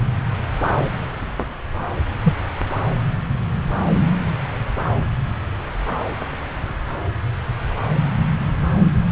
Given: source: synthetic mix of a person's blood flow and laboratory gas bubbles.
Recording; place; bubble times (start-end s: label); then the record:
Doppler ultrasound of blood flow; subclavian vein
2.23-2.34 s: bubbles
From the record:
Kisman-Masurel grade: 113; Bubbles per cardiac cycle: 1 to 2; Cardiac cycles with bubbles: 1 to 10%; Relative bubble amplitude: loud (0.450 to 0.775); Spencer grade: 1 (occasional bubble signal discernible with the cardiac motion signal, with majority of cardiac periods free of bubbles); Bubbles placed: anywhere in the cardiac cycle